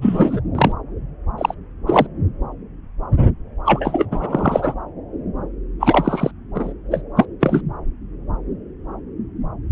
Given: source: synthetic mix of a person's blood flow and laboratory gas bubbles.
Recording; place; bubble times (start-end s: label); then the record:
Doppler ultrasound of blood flow; subclavian vein
0.01-0.40 s: bubbles
0.55-0.72 s: bubbles
1.38-1.54 s: bubbles
1.87-2.07 s: bubbles
3.65-4.05 s: bubbles
4.11-4.74 s: bubbles
5.79-6.31 s: bubbles
6.54-6.73 s: bubbles
6.91-7.01 s: bubbles
7.16-7.25 s: bubbles
7.40-7.62 s: bubbles
From the record:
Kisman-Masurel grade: 233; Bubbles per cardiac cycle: several, 3 to 8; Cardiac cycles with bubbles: 50 to 99%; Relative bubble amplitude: loud (0.450 to 0.775); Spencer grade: 3 (all of the cardiac periods contain showers or single bubble signals, but not dominating or overriding the cardiac motion signals); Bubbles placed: anywhere in the cardiac cycle